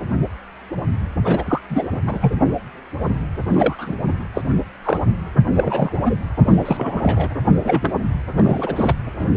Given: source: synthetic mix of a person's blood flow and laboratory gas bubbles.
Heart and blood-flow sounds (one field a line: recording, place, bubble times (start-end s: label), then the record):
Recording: Doppler ultrasound of blood flow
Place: precordium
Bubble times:
1.24-1.61 s: bubbles
1.70-1.89 s: bubbles
1.92-2.02 s: bubbles
2.07-2.33 s: bubbles
3.50-3.94 s: bubbles
4.34-4.42 s: bubbles
4.84-5.00 s: bubbles
5.55-6.00 s: bubbles
6.04-6.15 s: bubbles
6.36-7.30 s: bubbles
7.64-8.00 s: bubbles
8.37-8.95 s: bubbles
9.19-9.25 s: bubbles
From the record:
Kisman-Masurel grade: 232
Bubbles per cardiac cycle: several, 3 to 8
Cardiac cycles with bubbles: 50 to 99%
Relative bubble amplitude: moderate (0.250 to 0.450)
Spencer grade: 3 (all of the cardiac periods contain showers or single bubble signals, but not dominating or overriding the cardiac motion signals)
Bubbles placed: anywhere in the cardiac cycle